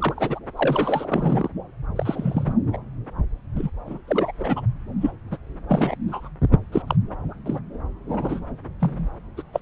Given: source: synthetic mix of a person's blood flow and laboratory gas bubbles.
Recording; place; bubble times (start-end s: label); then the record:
Doppler ultrasound of blood flow; subclavian vein
0.00-0.39 s: bubbles
0.57-1.50 s: bubbles
1.96-2.54 s: bubbles
2.73-2.77 s: bubbles
3.55-3.70 s: bubbles
3.86-3.98 s: bubbles
4.07-4.33 s: bubbles
4.39-4.62 s: bubbles
5.01-5.11 s: bubbles
5.31-5.38 s: bubbles
5.68-5.96 s: bubbles
6.08-6.29 s: bubbles
6.72-6.82 s: bubbles
6.87-6.96 s: bubbles
7.46-7.59 s: bubbles
8.09-8.41 s: bubbles
8.80-9.09 s: bubbles
9.37-9.43 s: bubbles
9.53-9.60 s: bubbles
From the record:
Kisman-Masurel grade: 242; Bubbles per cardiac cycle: several, 3 to 8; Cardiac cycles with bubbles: 100%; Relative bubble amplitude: moderate (0.250 to 0.450); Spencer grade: 3 (all of the cardiac periods contain showers or single bubble signals, but not dominating or overriding the cardiac motion signals); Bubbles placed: anywhere in the cardiac cycle